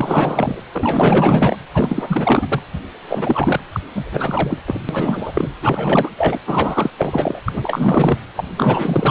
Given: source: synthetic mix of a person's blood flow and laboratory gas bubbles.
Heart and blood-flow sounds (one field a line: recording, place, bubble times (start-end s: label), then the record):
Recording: Doppler ultrasound of blood flow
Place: precordium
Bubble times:
0.00-0.60 s: bubbles
0.72-1.57 s: bubbles
1.74-2.62 s: bubbles
3.09-3.60 s: bubbles
3.72-3.80 s: bubbles
3.95-4.62 s: bubbles
4.67-4.82 s: bubbles
4.88-5.49 s: bubbles
5.62-6.09 s: bubbles
6.17-6.40 s: bubbles
6.46-6.90 s: bubbles
6.98-7.39 s: bubbles
7.46-8.18 s: bubbles
8.36-8.45 s: bubbles
8.57-9.11 s: bubbles
From the record:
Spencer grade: 4 (maximum detectable bubble signal sounding continuously throughout systole and diastole of every cardiac period, and overriding the amplitude of the normal cardiac signals)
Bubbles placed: anywhere in the cardiac cycle